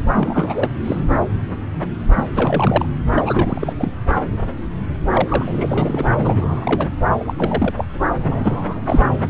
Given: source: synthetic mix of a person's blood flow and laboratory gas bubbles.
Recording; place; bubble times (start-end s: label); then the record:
Doppler ultrasound of blood flow; subclavian vein
0.14-0.69 s: bubbles
0.84-1.06 s: bubbles
2.16-2.29 s: bubbles
2.34-2.85 s: bubbles
3.15-3.73 s: bubbles
3.79-3.91 s: bubbles
5.13-6.05 s: bubbles
6.17-6.88 s: bubbles
7.19-7.33 s: bubbles
7.38-7.73 s: bubbles
7.77-7.84 s: bubbles
8.15-8.81 s: bubbles
8.85-9.08 s: bubbles
From the record:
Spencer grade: 3 (all of the cardiac periods contain showers or single bubble signals, but not dominating or overriding the cardiac motion signals); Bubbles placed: anywhere in the cardiac cycle